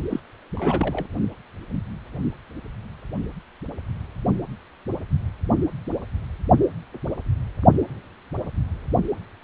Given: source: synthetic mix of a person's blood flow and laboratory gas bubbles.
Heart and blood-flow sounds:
Doppler ultrasound of blood flow; precordium
0.10-0.20 s: bubbles
0.56-1.07 s: bubbles
From the record:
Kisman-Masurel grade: 211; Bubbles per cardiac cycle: several, 3 to 8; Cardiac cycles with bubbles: 1 to 10%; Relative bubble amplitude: barely perceptible (0.100 to 0.250); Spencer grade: 1 (occasional bubble signal discernible with the cardiac motion signal, with majority of cardiac periods free of bubbles); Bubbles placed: only in the low amplitude regions of the cardiac cycle

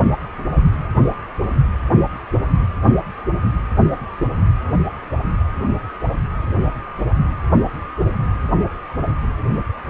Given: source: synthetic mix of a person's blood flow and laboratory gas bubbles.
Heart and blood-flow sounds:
Doppler ultrasound of blood flow; precordium
no bubbles
From the record:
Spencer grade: 0 (complete lack of bubble signals)

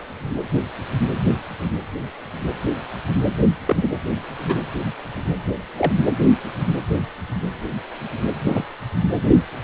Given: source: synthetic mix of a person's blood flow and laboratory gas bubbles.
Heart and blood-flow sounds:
Doppler ultrasound of blood flow; precordium
1.59-1.68 s: bubbles
3.66-3.91 s: bubbles
4.39-4.55 s: bubbles
5.78-5.92 s: bubbles
8.46-8.64 s: bubbles
From the record:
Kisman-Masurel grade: 122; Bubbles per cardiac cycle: 1 to 2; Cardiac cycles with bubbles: 10 to 50%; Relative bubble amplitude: moderate (0.250 to 0.450); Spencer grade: 2 (many but less than half of the cardiac periods contain bubble signals, singularly or in groups); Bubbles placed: anywhere in the cardiac cycle

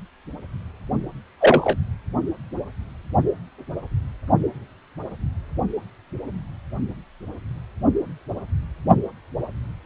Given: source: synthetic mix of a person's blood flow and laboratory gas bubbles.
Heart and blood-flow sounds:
Doppler ultrasound of blood flow; precordium
1.41-1.76 s: bubbles
From the record:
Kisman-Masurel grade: 113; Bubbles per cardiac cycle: 1 to 2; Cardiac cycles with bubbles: 1 to 10%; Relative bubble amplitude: loud (0.450 to 0.775); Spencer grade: 1 (occasional bubble signal discernible with the cardiac motion signal, with majority of cardiac periods free of bubbles); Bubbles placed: only in the low amplitude regions of the cardiac cycle

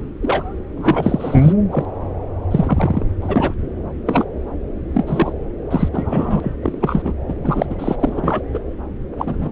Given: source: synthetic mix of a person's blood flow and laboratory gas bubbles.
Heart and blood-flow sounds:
Doppler ultrasound of blood flow; subclavian vein
0.00-0.05 s: bubbles
0.21-0.43 s: bubbles
0.76-1.53 s: bubbles
1.71-1.85 s: bubbles
2.50-3.05 s: bubbles
3.22-3.54 s: bubbles
4.06-4.24 s: bubbles
4.94-5.33 s: bubbles
5.71-5.89 s: bubbles
5.93-6.56 s: bubbles
6.62-7.12 s: bubbles
7.28-7.34 s: bubbles
7.44-7.66 s: bubbles
7.70-7.75 s: bubbles
7.79-7.96 s: bubbles
7.99-8.40 s: bubbles
8.54-8.59 s: bubbles
9.17-9.49 s: bubbles
From the record:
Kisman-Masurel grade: 243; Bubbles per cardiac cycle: several, 3 to 8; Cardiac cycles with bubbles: 100%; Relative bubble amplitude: loud (0.450 to 0.775); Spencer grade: 3 (all of the cardiac periods contain showers or single bubble signals, but not dominating or overriding the cardiac motion signals); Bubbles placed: anywhere in the cardiac cycle

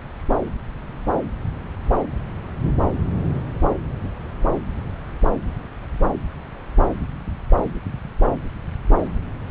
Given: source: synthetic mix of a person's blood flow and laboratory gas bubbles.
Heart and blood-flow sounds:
Doppler ultrasound of blood flow; subclavian vein
no bubbles
From the record:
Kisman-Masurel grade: 000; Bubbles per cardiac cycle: 0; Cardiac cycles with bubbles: 0%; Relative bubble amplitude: no bubbles discernible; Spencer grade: 0 (complete lack of bubble signals)

